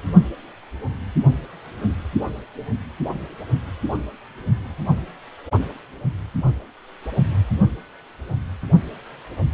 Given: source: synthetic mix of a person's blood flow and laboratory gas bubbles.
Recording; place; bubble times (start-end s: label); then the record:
Doppler ultrasound of blood flow; precordium
no bubbles
From the record:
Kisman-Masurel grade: 000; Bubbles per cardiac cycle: 0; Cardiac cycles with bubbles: 0%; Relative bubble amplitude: no bubbles discernible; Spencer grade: 0 (complete lack of bubble signals)